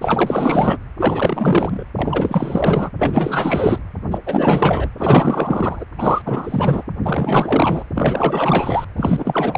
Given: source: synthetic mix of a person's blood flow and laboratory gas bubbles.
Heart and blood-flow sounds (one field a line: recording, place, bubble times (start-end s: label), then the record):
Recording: Doppler ultrasound of blood flow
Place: precordium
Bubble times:
0.00-0.78 s: bubbles
0.99-1.83 s: bubbles
1.95-2.90 s: bubbles
2.98-3.78 s: bubbles
4.11-4.18 s: bubbles
4.26-4.89 s: bubbles
4.98-5.85 s: bubbles
5.98-6.84 s: bubbles
7.04-7.83 s: bubbles
7.95-8.84 s: bubbles
8.96-9.58 s: bubbles
From the record:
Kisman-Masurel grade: 444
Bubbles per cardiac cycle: continuous sound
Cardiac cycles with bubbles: 100%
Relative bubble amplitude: maximal (0.775 to 0.999)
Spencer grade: 4 (maximum detectable bubble signal sounding continuously throughout systole and diastole of every cardiac period, and overriding the amplitude of the normal cardiac signals)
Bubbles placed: anywhere in the cardiac cycle